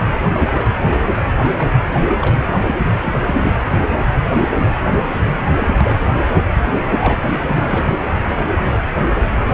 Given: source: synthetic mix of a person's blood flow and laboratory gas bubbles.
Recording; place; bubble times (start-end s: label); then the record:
Doppler ultrasound of blood flow; precordium
0.33-0.71 s: bubbles
0.84-0.91 s: bubbles
1.43-1.53 s: bubbles
1.58-1.69 s: bubbles
1.93-2.03 s: bubbles
2.08-2.18 s: bubbles
2.21-2.36 s: bubbles
2.66-2.75 s: bubbles
2.78-2.88 s: bubbles
3.02-3.20 s: bubbles
3.26-3.59 s: bubbles
4.32-4.52 s: bubbles
4.56-4.72 s: bubbles
5.15-5.32 s: bubbles
5.58-5.97 s: bubbles
6.92-7.23 s: bubbles
7.27-7.84 s: bubbles
From the record:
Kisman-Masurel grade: 232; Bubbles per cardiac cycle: several, 3 to 8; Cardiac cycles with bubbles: 50 to 99%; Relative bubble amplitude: moderate (0.250 to 0.450); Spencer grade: 3 (all of the cardiac periods contain showers or single bubble signals, but not dominating or overriding the cardiac motion signals); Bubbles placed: anywhere in the cardiac cycle